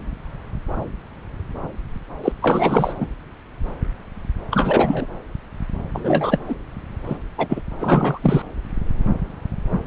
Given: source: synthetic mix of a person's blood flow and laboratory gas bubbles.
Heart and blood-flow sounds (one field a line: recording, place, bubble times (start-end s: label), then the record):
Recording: Doppler ultrasound of blood flow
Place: subclavian vein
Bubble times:
2.23-2.32 s: bubbles
2.42-2.93 s: bubbles
3.00-3.06 s: bubbles
4.51-5.06 s: bubbles
5.92-6.38 s: bubbles
6.48-6.55 s: bubbles
7.07-7.17 s: bubbles
7.38-7.61 s: bubbles
7.79-8.42 s: bubbles
From the record:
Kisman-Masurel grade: 223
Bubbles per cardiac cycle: several, 3 to 8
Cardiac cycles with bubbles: 10 to 50%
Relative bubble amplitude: loud (0.450 to 0.775)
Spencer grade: 2 (many but less than half of the cardiac periods contain bubble signals, singularly or in groups)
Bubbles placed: anywhere in the cardiac cycle